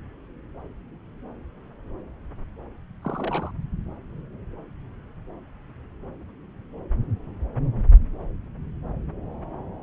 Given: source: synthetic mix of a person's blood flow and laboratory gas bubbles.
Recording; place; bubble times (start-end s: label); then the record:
Doppler ultrasound of blood flow; subclavian vein
3.02-3.51 s: bubbles
From the record:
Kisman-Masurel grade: 111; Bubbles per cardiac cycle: 1 to 2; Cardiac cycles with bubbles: 1 to 10%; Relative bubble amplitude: barely perceptible (0.100 to 0.250); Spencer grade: 1 (occasional bubble signal discernible with the cardiac motion signal, with majority of cardiac periods free of bubbles); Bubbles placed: anywhere in the cardiac cycle